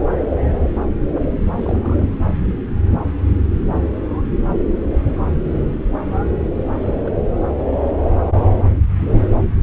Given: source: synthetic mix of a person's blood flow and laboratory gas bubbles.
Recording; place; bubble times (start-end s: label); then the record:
Doppler ultrasound of blood flow; subclavian vein
1.05-1.14 s: bubbles
1.54-2.07 s: bubbles
6.80-7.14 s: bubbles
From the record:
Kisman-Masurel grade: 221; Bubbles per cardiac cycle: several, 3 to 8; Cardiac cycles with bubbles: 10 to 50%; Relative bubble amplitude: barely perceptible (0.100 to 0.250); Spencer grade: 2 (many but less than half of the cardiac periods contain bubble signals, singularly or in groups); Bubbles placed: anywhere in the cardiac cycle